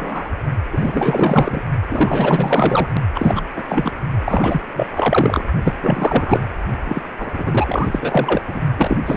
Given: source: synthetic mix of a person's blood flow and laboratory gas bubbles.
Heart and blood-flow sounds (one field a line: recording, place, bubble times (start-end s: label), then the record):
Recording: Doppler ultrasound of blood flow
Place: precordium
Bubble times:
0.00-0.29 s: bubbles
0.72-1.62 s: bubbles
1.90-2.89 s: bubbles
3.15-3.44 s: bubbles
3.56-3.64 s: bubbles
3.68-3.92 s: bubbles
4.25-4.61 s: bubbles
4.75-4.88 s: bubbles
4.93-5.46 s: bubbles
5.63-5.73 s: bubbles
5.80-6.42 s: bubbles
6.84-7.02 s: bubbles
7.18-8.42 s: bubbles
8.46-8.61 s: bubbles
8.77-8.97 s: bubbles
9.05-9.17 s: bubbles
From the record:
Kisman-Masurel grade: 444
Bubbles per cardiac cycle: continuous sound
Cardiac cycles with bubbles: 100%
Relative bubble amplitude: maximal (0.775 to 0.999)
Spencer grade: 4 (maximum detectable bubble signal sounding continuously throughout systole and diastole of every cardiac period, and overriding the amplitude of the normal cardiac signals)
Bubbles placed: only in the low amplitude regions of the cardiac cycle